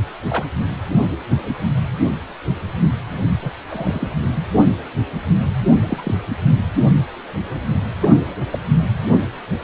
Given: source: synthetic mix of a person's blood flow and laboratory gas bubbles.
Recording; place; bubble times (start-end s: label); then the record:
Doppler ultrasound of blood flow; precordium
0.28-0.46 s: bubbles
3.42-3.51 s: bubbles
3.69-4.08 s: bubbles
5.83-6.15 s: bubbles
8.01-8.09 s: bubbles
8.51-8.59 s: bubbles
8.99-9.21 s: bubbles
From the record:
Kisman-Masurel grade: 122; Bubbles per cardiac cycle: 1 to 2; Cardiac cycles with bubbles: 10 to 50%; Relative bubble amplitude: moderate (0.250 to 0.450); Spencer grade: 2 (many but less than half of the cardiac periods contain bubble signals, singularly or in groups); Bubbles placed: anywhere in the cardiac cycle